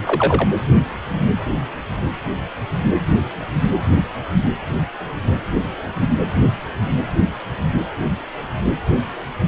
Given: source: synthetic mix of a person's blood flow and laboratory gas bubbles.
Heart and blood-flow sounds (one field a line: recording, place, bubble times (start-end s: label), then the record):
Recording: Doppler ultrasound of blood flow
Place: precordium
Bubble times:
0.06-0.48 s: bubbles
From the record:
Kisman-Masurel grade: 112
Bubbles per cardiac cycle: 1 to 2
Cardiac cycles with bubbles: 1 to 10%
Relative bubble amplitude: moderate (0.250 to 0.450)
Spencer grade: 1 (occasional bubble signal discernible with the cardiac motion signal, with majority of cardiac periods free of bubbles)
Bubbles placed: anywhere in the cardiac cycle